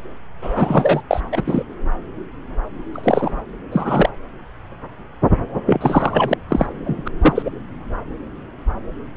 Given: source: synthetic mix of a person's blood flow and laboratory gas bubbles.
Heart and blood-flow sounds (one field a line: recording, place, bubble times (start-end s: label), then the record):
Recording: Doppler ultrasound of blood flow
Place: subclavian vein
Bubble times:
0.42-1.02 s: bubbles
1.10-1.21 s: bubbles
1.31-1.64 s: bubbles
2.93-3.40 s: bubbles
3.71-4.09 s: bubbles
5.66-6.33 s: bubbles
6.49-6.66 s: bubbles
6.85-7.08 s: bubbles
7.21-7.51 s: bubbles
From the record:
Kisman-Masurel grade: 233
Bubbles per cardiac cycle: several, 3 to 8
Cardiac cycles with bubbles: 50 to 99%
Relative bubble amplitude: loud (0.450 to 0.775)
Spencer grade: 3 (all of the cardiac periods contain showers or single bubble signals, but not dominating or overriding the cardiac motion signals)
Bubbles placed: anywhere in the cardiac cycle